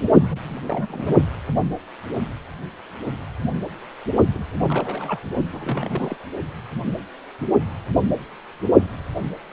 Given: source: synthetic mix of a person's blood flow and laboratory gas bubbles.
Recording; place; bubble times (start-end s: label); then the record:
Doppler ultrasound of blood flow; precordium
0.00-0.03 s: bubbles
0.29-1.21 s: bubbles
4.34-4.45 s: bubbles
4.69-5.19 s: bubbles
5.51-6.17 s: bubbles
From the record:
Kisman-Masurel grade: 221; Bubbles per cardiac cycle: several, 3 to 8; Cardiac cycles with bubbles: 10 to 50%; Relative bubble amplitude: barely perceptible (0.100 to 0.250); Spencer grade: 2 (many but less than half of the cardiac periods contain bubble signals, singularly or in groups); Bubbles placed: only in the low amplitude regions of the cardiac cycle